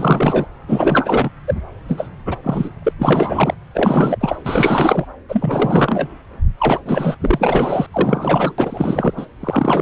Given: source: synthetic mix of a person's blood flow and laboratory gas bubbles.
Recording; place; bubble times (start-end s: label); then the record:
Doppler ultrasound of blood flow; subclavian vein
0.00-0.47 s: bubbles
0.67-1.29 s: bubbles
1.47-1.54 s: bubbles
1.88-2.08 s: bubbles
2.26-2.37 s: bubbles
2.43-2.69 s: bubbles
2.82-2.93 s: bubbles
2.99-3.54 s: bubbles
3.74-4.38 s: bubbles
4.44-5.05 s: bubbles
5.28-6.08 s: bubbles
6.58-6.81 s: bubbles
6.86-7.17 s: bubbles
7.21-7.87 s: bubbles
7.92-8.54 s: bubbles
8.58-9.13 s: bubbles
9.16-9.26 s: bubbles
9.40-9.81 s: bubbles
From the record:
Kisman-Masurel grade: 444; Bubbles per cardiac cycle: continuous sound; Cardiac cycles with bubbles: 100%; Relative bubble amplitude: maximal (0.775 to 0.999); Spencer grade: 4 (maximum detectable bubble signal sounding continuously throughout systole and diastole of every cardiac period, and overriding the amplitude of the normal cardiac signals); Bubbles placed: anywhere in the cardiac cycle